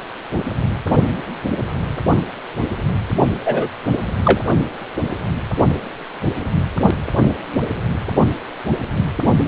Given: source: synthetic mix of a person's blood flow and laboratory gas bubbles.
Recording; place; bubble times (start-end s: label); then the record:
Doppler ultrasound of blood flow; precordium
3.45-3.68 s: bubbles
4.24-4.41 s: bubbles
From the record:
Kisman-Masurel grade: 113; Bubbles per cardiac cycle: 1 to 2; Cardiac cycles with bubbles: 1 to 10%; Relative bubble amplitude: loud (0.450 to 0.775); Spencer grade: 1 (occasional bubble signal discernible with the cardiac motion signal, with majority of cardiac periods free of bubbles); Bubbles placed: only in the low amplitude regions of the cardiac cycle